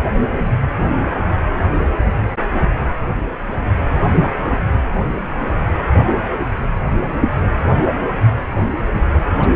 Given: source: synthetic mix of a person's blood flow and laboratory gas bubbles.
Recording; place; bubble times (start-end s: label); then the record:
Doppler ultrasound of blood flow; precordium
1.72-1.87 s: bubbles
4.42-4.58 s: bubbles
9.39-9.54 s: bubbles
From the record:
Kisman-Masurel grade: 121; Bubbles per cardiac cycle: 1 to 2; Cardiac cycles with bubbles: 10 to 50%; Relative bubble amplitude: barely perceptible (0.100 to 0.250); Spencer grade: 2 (many but less than half of the cardiac periods contain bubble signals, singularly or in groups); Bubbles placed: anywhere in the cardiac cycle